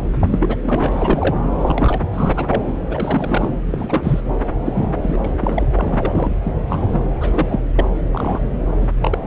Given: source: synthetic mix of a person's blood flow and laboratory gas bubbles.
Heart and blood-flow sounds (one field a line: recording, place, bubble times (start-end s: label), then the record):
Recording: Doppler ultrasound of blood flow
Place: subclavian vein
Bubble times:
0.20-0.56 s: bubbles
0.62-1.38 s: bubbles
1.51-2.03 s: bubbles
2.13-2.78 s: bubbles
2.88-3.50 s: bubbles
3.66-4.21 s: bubbles
4.65-4.95 s: bubbles
5.02-5.19 s: bubbles
5.24-5.33 s: bubbles
5.41-5.67 s: bubbles
5.75-6.34 s: bubbles
6.44-6.55 s: bubbles
6.67-7.02 s: bubbles
7.20-7.46 s: bubbles
7.50-7.59 s: bubbles
7.76-7.86 s: bubbles
8.12-8.41 s: bubbles
8.81-8.88 s: bubbles
9.02-9.19 s: bubbles
From the record:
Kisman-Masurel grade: 243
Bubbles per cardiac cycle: several, 3 to 8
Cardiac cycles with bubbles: 100%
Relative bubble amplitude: loud (0.450 to 0.775)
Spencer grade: 3 (all of the cardiac periods contain showers or single bubble signals, but not dominating or overriding the cardiac motion signals)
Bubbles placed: anywhere in the cardiac cycle